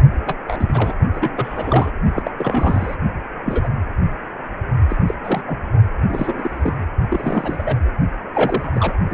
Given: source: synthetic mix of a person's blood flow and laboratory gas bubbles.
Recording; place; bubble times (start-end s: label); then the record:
Doppler ultrasound of blood flow; precordium
0.26-0.35 s: bubbles
0.46-0.93 s: bubbles
1.13-1.92 s: bubbles
2.14-2.31 s: bubbles
2.37-2.95 s: bubbles
3.44-3.69 s: bubbles
4.89-4.97 s: bubbles
5.07-5.14 s: bubbles
5.23-5.42 s: bubbles
5.47-5.58 s: bubbles
6.08-6.85 s: bubbles
7.10-7.76 s: bubbles
8.34-8.95 s: bubbles
9.10-9.14 s: bubbles
From the record:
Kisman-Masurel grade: 232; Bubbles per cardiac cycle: several, 3 to 8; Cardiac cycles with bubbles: 50 to 99%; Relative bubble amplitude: moderate (0.250 to 0.450); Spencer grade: 3 (all of the cardiac periods contain showers or single bubble signals, but not dominating or overriding the cardiac motion signals); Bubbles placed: only in the low amplitude regions of the cardiac cycle